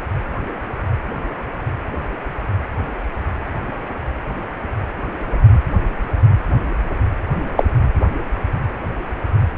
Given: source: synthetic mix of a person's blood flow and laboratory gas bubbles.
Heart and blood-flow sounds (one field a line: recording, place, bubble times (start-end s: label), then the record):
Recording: Doppler ultrasound of blood flow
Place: precordium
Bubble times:
7.57-7.65 s: bubbles
From the record:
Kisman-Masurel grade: 113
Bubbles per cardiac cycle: 1 to 2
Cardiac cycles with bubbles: 1 to 10%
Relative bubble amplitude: loud (0.450 to 0.775)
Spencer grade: 1 (occasional bubble signal discernible with the cardiac motion signal, with majority of cardiac periods free of bubbles)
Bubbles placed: anywhere in the cardiac cycle